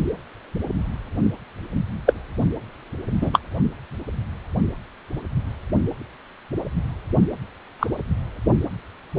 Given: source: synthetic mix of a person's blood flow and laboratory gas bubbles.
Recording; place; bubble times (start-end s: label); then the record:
Doppler ultrasound of blood flow; precordium
2.06-2.13 s: bubbles
3.21-3.30 s: bubbles
3.33-3.39 s: bubbles
7.79-7.87 s: bubbles
From the record:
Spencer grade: 2 (many but less than half of the cardiac periods contain bubble signals, singularly or in groups); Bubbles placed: only in the low amplitude regions of the cardiac cycle